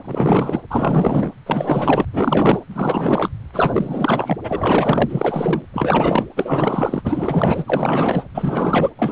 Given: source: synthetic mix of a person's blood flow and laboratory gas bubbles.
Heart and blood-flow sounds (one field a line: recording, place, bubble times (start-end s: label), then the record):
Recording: Doppler ultrasound of blood flow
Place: precordium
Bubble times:
0.04-0.62 s: bubbles
0.70-1.32 s: bubbles
1.46-2.06 s: bubbles
2.13-2.60 s: bubbles
2.69-3.29 s: bubbles
3.53-4.38 s: bubbles
4.44-5.65 s: bubbles
5.73-6.26 s: bubbles
6.36-7.02 s: bubbles
7.05-8.24 s: bubbles
8.34-8.90 s: bubbles
8.96-9.12 s: bubbles
From the record:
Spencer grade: 4 (maximum detectable bubble signal sounding continuously throughout systole and diastole of every cardiac period, and overriding the amplitude of the normal cardiac signals)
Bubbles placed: anywhere in the cardiac cycle